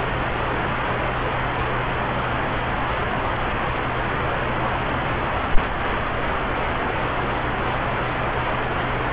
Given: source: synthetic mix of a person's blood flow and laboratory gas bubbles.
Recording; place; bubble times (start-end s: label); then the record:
Doppler ultrasound of blood flow; subclavian vein
no bubbles
From the record:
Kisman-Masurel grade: 000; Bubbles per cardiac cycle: 0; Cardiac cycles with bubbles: 0%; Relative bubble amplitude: no bubbles discernible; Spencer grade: 0 (complete lack of bubble signals)